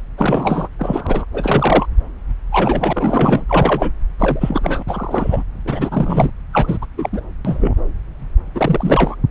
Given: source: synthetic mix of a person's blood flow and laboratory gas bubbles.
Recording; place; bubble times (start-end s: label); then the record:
Doppler ultrasound of blood flow; subclavian vein
0.18-0.68 s: bubbles
0.79-1.25 s: bubbles
1.34-1.87 s: bubbles
2.52-3.45 s: bubbles
3.48-3.92 s: bubbles
4.18-4.82 s: bubbles
4.87-5.42 s: bubbles
5.64-6.30 s: bubbles
6.53-6.78 s: bubbles
6.81-6.86 s: bubbles
6.97-7.09 s: bubbles
7.12-7.21 s: bubbles
7.44-7.73 s: bubbles
8.54-9.15 s: bubbles
From the record:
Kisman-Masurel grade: 333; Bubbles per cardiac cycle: rolling drumbeat, 9 or more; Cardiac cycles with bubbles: 50 to 99%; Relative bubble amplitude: loud (0.450 to 0.775); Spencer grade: 3 (all of the cardiac periods contain showers or single bubble signals, but not dominating or overriding the cardiac motion signals); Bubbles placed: anywhere in the cardiac cycle